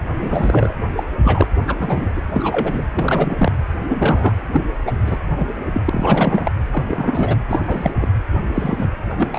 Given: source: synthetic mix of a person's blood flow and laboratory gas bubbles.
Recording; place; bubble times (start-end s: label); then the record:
Doppler ultrasound of blood flow; precordium
0.20-0.74 s: bubbles
0.96-1.04 s: bubbles
1.24-1.48 s: bubbles
1.67-2.09 s: bubbles
2.16-2.21 s: bubbles
2.31-2.83 s: bubbles
2.94-3.52 s: bubbles
3.89-4.33 s: bubbles
4.36-4.78 s: bubbles
4.86-4.92 s: bubbles
5.05-5.18 s: bubbles
5.36-5.47 s: bubbles
5.72-5.83 s: bubbles
5.85-6.51 s: bubbles
6.71-7.40 s: bubbles
7.48-7.92 s: bubbles
7.99-8.07 s: bubbles
8.54-8.90 s: bubbles
9.11-9.14 s: bubbles
9.18-9.39 s: bubbles
From the record:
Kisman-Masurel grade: 233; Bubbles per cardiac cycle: several, 3 to 8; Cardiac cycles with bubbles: 50 to 99%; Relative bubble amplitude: loud (0.450 to 0.775); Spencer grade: 3 (all of the cardiac periods contain showers or single bubble signals, but not dominating or overriding the cardiac motion signals); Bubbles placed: anywhere in the cardiac cycle